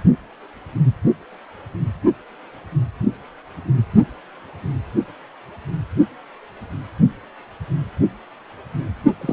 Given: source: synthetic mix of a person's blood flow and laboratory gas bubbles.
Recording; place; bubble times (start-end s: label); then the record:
Doppler ultrasound of blood flow; precordium
9.21-9.33 s: bubbles
From the record:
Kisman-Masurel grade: 112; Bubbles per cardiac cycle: 1 to 2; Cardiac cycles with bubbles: 1 to 10%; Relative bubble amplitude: moderate (0.250 to 0.450); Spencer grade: 1 (occasional bubble signal discernible with the cardiac motion signal, with majority of cardiac periods free of bubbles); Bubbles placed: only in the low amplitude regions of the cardiac cycle